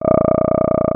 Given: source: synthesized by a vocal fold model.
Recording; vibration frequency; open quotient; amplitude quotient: sustained vowel; 30 Hz; 0.1; 1.3